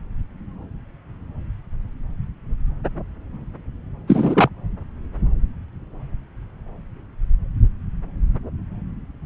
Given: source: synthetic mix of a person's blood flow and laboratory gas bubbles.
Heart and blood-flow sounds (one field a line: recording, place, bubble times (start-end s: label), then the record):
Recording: Doppler ultrasound of blood flow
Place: subclavian vein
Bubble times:
4.07-4.49 s: bubbles
From the record:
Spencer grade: 1 (occasional bubble signal discernible with the cardiac motion signal, with majority of cardiac periods free of bubbles)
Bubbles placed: anywhere in the cardiac cycle